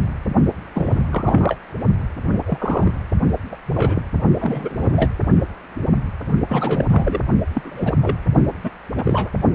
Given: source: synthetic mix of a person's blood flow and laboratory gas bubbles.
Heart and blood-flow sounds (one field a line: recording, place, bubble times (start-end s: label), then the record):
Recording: Doppler ultrasound of blood flow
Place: precordium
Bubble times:
0.74-1.03 s: bubbles
1.11-1.56 s: bubbles
2.27-2.39 s: bubbles
2.46-2.92 s: bubbles
3.51-3.55 s: bubbles
3.65-4.03 s: bubbles
4.41-5.11 s: bubbles
6.48-6.86 s: bubbles
6.89-7.21 s: bubbles
7.54-7.97 s: bubbles
8.02-8.17 s: bubbles
8.63-8.70 s: bubbles
8.97-9.29 s: bubbles
From the record:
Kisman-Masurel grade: 232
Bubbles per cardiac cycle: several, 3 to 8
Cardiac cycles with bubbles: 50 to 99%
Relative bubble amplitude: moderate (0.250 to 0.450)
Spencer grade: 3 (all of the cardiac periods contain showers or single bubble signals, but not dominating or overriding the cardiac motion signals)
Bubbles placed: only in the low amplitude regions of the cardiac cycle